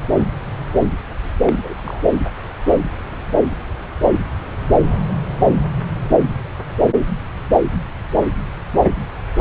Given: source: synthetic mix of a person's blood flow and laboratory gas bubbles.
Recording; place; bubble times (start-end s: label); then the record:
Doppler ultrasound of blood flow; subclavian vein
1.46-1.74 s: bubbles
1.77-2.00 s: bubbles
From the record:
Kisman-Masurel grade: 211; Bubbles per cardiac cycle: several, 3 to 8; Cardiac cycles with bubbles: 1 to 10%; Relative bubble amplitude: barely perceptible (0.100 to 0.250); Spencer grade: 1 (occasional bubble signal discernible with the cardiac motion signal, with majority of cardiac periods free of bubbles); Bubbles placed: anywhere in the cardiac cycle